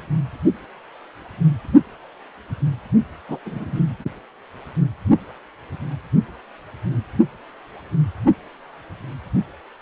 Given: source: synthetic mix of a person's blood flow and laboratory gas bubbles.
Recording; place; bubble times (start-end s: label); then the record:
Doppler ultrasound of blood flow; precordium
3.28-3.39 s: bubbles
3.45-3.79 s: bubbles
From the record:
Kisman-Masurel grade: 222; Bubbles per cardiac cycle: several, 3 to 8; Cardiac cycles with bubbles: 10 to 50%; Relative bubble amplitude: moderate (0.250 to 0.450); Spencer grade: 2 (many but less than half of the cardiac periods contain bubble signals, singularly or in groups); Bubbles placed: only in the low amplitude regions of the cardiac cycle